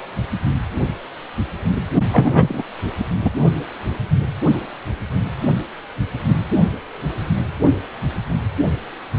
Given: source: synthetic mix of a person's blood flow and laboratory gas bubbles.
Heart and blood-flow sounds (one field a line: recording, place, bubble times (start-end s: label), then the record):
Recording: Doppler ultrasound of blood flow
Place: precordium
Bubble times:
2.12-2.62 s: bubbles
3.21-3.30 s: bubbles
From the record:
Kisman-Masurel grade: 123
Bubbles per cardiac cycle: 1 to 2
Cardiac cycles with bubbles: 10 to 50%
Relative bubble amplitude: loud (0.450 to 0.775)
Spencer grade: 2 (many but less than half of the cardiac periods contain bubble signals, singularly or in groups)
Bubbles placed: only in the low amplitude regions of the cardiac cycle